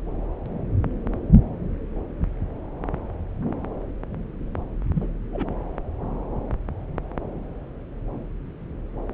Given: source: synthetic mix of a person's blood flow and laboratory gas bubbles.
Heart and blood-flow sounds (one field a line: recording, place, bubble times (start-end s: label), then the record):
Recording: Doppler ultrasound of blood flow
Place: subclavian vein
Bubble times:
4.95-5.08 s: bubbles
5.33-5.47 s: bubbles
From the record:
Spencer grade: 1 (occasional bubble signal discernible with the cardiac motion signal, with majority of cardiac periods free of bubbles)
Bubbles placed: anywhere in the cardiac cycle